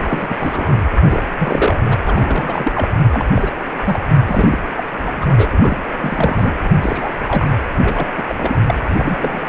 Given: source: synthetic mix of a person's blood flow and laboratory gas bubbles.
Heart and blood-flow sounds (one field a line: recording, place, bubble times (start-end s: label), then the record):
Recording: Doppler ultrasound of blood flow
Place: precordium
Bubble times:
0.00-0.35 s: bubbles
0.39-0.83 s: bubbles
1.01-1.23 s: bubbles
1.38-1.80 s: bubbles
1.84-1.98 s: bubbles
2.06-2.89 s: bubbles
3.11-3.25 s: bubbles
3.34-3.50 s: bubbles
3.84-4.00 s: bubbles
4.26-4.58 s: bubbles
4.76-4.84 s: bubbles
5.04-5.50 s: bubbles
5.52-5.81 s: bubbles
5.99-6.52 s: bubbles
6.62-6.69 s: bubbles
6.81-7.13 s: bubbles
7.27-7.47 s: bubbles
7.83-8.07 s: bubbles
8.18-8.24 s: bubbles
8.29-8.36 s: bubbles
8.38-8.56 s: bubbles
8.66-8.75 s: bubbles
8.87-8.94 s: bubbles
8.96-9.43 s: bubbles
From the record:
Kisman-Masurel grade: 342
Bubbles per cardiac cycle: rolling drumbeat, 9 or more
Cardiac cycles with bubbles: 100%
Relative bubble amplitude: moderate (0.250 to 0.450)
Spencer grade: 3 (all of the cardiac periods contain showers or single bubble signals, but not dominating or overriding the cardiac motion signals)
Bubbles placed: anywhere in the cardiac cycle